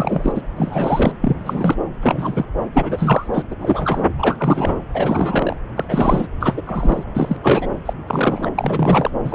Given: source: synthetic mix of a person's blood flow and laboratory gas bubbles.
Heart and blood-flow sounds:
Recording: Doppler ultrasound of blood flow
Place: subclavian vein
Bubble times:
0.00-0.42 s: bubbles
0.57-1.12 s: bubbles
1.21-1.75 s: bubbles
2.02-2.46 s: bubbles
2.73-3.27 s: bubbles
3.33-3.42 s: bubbles
3.50-3.56 s: bubbles
3.60-4.05 s: bubbles
4.18-4.83 s: bubbles
4.94-5.57 s: bubbles
5.76-5.85 s: bubbles
5.89-6.27 s: bubbles
6.40-6.62 s: bubbles
6.66-7.04 s: bubbles
7.14-7.37 s: bubbles
7.43-7.67 s: bubbles
7.86-7.94 s: bubbles
8.06-8.50 s: bubbles
8.58-9.11 s: bubbles
9.25-9.35 s: bubbles
From the record:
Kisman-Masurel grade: 343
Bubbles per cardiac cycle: rolling drumbeat, 9 or more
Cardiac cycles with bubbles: 100%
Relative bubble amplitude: loud (0.450 to 0.775)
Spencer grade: 3 (all of the cardiac periods contain showers or single bubble signals, but not dominating or overriding the cardiac motion signals)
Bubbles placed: anywhere in the cardiac cycle

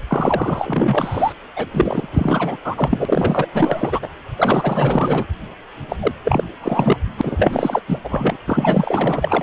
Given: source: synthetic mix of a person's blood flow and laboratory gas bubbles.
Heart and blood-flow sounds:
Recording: Doppler ultrasound of blood flow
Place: precordium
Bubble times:
0.08-1.33 s: bubbles
1.56-1.67 s: bubbles
1.73-2.08 s: bubbles
2.13-2.57 s: bubbles
2.64-3.47 s: bubbles
3.52-4.10 s: bubbles
4.38-5.25 s: bubbles
5.89-5.96 s: bubbles
6.01-6.12 s: bubbles
6.24-6.44 s: bubbles
6.62-6.97 s: bubbles
7.17-7.81 s: bubbles
7.88-7.99 s: bubbles
8.04-8.37 s: bubbles
8.47-9.43 s: bubbles
From the record:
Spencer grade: 4 (maximum detectable bubble signal sounding continuously throughout systole and diastole of every cardiac period, and overriding the amplitude of the normal cardiac signals)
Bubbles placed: anywhere in the cardiac cycle

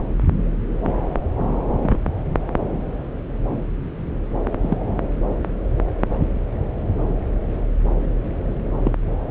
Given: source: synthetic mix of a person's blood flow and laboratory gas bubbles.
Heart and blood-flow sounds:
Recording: Doppler ultrasound of blood flow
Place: subclavian vein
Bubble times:
1.82-1.98 s: bubbles
4.61-4.77 s: bubbles
8.84-8.92 s: bubbles
From the record:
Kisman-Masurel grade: 122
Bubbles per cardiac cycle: 1 to 2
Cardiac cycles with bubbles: 10 to 50%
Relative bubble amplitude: moderate (0.250 to 0.450)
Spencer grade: 2 (many but less than half of the cardiac periods contain bubble signals, singularly or in groups)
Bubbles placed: anywhere in the cardiac cycle

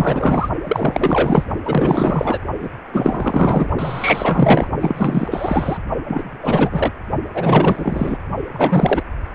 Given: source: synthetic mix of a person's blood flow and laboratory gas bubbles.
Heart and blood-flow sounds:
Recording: Doppler ultrasound of blood flow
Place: precordium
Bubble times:
0.00-0.49 s: bubbles
0.63-1.44 s: bubbles
1.65-2.39 s: bubbles
2.60-2.69 s: bubbles
2.92-3.69 s: bubbles
3.78-4.68 s: bubbles
4.80-5.77 s: bubbles
6.07-6.91 s: bubbles
7.34-8.17 s: bubbles
8.53-9.03 s: bubbles
From the record:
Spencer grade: 4 (maximum detectable bubble signal sounding continuously throughout systole and diastole of every cardiac period, and overriding the amplitude of the normal cardiac signals)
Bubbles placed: only in the low amplitude regions of the cardiac cycle

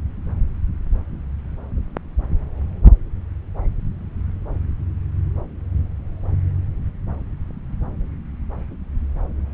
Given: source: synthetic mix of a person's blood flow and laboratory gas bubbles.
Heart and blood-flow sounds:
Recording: Doppler ultrasound of blood flow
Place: subclavian vein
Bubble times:
no bubbles
From the record:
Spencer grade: 0 (complete lack of bubble signals)

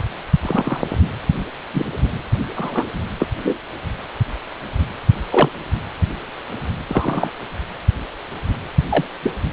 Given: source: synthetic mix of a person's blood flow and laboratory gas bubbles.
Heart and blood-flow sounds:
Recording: Doppler ultrasound of blood flow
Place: precordium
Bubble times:
0.43-0.82 s: bubbles
1.74-1.86 s: bubbles
2.56-2.85 s: bubbles
3.20-3.27 s: bubbles
3.42-3.58 s: bubbles
5.30-5.49 s: bubbles
6.88-7.30 s: bubbles
8.89-9.04 s: bubbles
9.23-9.31 s: bubbles
From the record:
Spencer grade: 2 (many but less than half of the cardiac periods contain bubble signals, singularly or in groups)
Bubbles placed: anywhere in the cardiac cycle

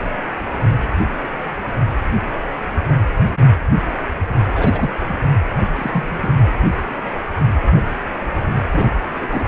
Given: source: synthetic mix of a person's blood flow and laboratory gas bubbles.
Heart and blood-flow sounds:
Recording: Doppler ultrasound of blood flow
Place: precordium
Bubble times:
4.54-4.90 s: bubbles
5.08-5.15 s: bubbles
5.75-6.33 s: bubbles
8.71-8.92 s: bubbles
9.21-9.48 s: bubbles
From the record:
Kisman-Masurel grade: 232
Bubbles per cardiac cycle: several, 3 to 8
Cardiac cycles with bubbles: 50 to 99%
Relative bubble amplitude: moderate (0.250 to 0.450)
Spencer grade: 3 (all of the cardiac periods contain showers or single bubble signals, but not dominating or overriding the cardiac motion signals)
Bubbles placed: anywhere in the cardiac cycle

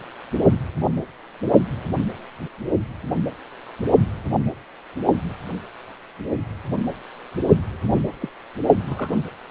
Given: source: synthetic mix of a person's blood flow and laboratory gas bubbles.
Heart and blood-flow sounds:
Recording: Doppler ultrasound of blood flow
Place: precordium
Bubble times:
7.92-8.02 s: bubbles
8.20-8.29 s: bubbles
8.88-9.19 s: bubbles
From the record:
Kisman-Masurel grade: 121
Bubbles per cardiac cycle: 1 to 2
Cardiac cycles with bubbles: 10 to 50%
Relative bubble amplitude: barely perceptible (0.100 to 0.250)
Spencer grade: 2 (many but less than half of the cardiac periods contain bubble signals, singularly or in groups)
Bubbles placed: only in the low amplitude regions of the cardiac cycle

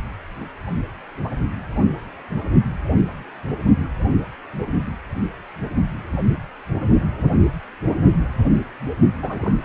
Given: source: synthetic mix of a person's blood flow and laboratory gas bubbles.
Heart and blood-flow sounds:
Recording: Doppler ultrasound of blood flow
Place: precordium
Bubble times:
9.22-9.58 s: bubbles
9.62-9.65 s: bubbles
From the record:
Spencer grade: 1 (occasional bubble signal discernible with the cardiac motion signal, with majority of cardiac periods free of bubbles)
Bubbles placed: only in the low amplitude regions of the cardiac cycle

